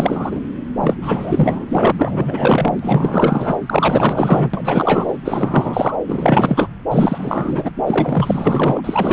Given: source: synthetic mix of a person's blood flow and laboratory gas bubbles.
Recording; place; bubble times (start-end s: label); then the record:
Doppler ultrasound of blood flow; subclavian vein
0.00-0.40 s: bubbles
0.80-0.96 s: bubbles
1.02-1.66 s: bubbles
1.70-1.92 s: bubbles
1.97-3.56 s: bubbles
3.66-4.51 s: bubbles
4.54-5.17 s: bubbles
5.25-5.96 s: bubbles
6.07-6.67 s: bubbles
6.90-7.70 s: bubbles
7.87-8.81 s: bubbles
8.84-9.13 s: bubbles
From the record:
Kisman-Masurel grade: 444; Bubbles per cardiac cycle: continuous sound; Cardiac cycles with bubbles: 100%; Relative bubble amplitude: maximal (0.775 to 0.999); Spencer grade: 4 (maximum detectable bubble signal sounding continuously throughout systole and diastole of every cardiac period, and overriding the amplitude of the normal cardiac signals); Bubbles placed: anywhere in the cardiac cycle